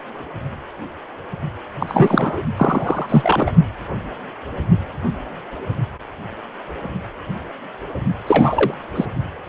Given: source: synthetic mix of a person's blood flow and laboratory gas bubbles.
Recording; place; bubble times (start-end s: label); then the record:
Doppler ultrasound of blood flow; precordium
1.80-2.42 s: bubbles
2.56-3.51 s: bubbles
8.27-8.74 s: bubbles
8.95-9.05 s: bubbles
From the record:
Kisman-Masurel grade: 223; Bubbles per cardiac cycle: several, 3 to 8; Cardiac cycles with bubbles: 10 to 50%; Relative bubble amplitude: loud (0.450 to 0.775); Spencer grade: 2 (many but less than half of the cardiac periods contain bubble signals, singularly or in groups); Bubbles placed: only in the low amplitude regions of the cardiac cycle